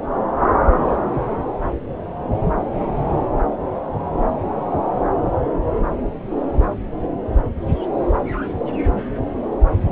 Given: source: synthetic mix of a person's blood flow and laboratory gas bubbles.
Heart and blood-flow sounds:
Doppler ultrasound of blood flow; subclavian vein
no bubbles
From the record:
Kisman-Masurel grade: 000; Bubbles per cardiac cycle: 0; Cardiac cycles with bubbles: 0%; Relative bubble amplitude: no bubbles discernible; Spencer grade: 0 (complete lack of bubble signals)

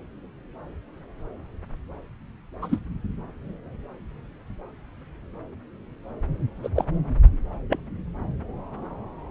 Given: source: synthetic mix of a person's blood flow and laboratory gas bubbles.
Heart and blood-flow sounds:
Doppler ultrasound of blood flow; subclavian vein
2.62-2.79 s: bubbles
6.62-6.69 s: bubbles
6.75-6.84 s: bubbles
7.70-7.79 s: bubbles
From the record:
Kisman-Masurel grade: 122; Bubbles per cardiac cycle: 1 to 2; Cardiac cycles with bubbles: 10 to 50%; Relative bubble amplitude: moderate (0.250 to 0.450); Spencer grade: 2 (many but less than half of the cardiac periods contain bubble signals, singularly or in groups); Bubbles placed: anywhere in the cardiac cycle

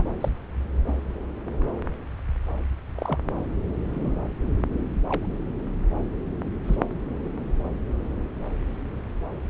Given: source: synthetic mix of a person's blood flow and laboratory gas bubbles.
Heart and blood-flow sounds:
Doppler ultrasound of blood flow; subclavian vein
0.00-0.04 s: bubbles
0.21-0.29 s: bubbles
0.87-0.92 s: bubbles
2.96-3.18 s: bubbles
3.93-4.12 s: bubbles
5.07-5.25 s: bubbles
6.64-6.76 s: bubbles
From the record:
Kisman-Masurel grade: 122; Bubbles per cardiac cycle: 1 to 2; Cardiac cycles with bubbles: 10 to 50%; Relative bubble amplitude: moderate (0.250 to 0.450); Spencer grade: 2 (many but less than half of the cardiac periods contain bubble signals, singularly or in groups); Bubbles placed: anywhere in the cardiac cycle

